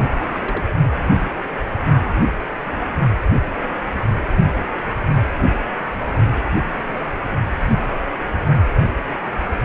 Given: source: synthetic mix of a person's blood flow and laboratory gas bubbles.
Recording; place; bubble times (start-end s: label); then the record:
Doppler ultrasound of blood flow; precordium
0.00-0.05 s: bubbles
0.39-0.66 s: bubbles
From the record:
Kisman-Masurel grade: 111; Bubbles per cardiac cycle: 1 to 2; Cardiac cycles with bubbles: 1 to 10%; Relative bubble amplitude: barely perceptible (0.100 to 0.250); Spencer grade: 1 (occasional bubble signal discernible with the cardiac motion signal, with majority of cardiac periods free of bubbles); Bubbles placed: only in the low amplitude regions of the cardiac cycle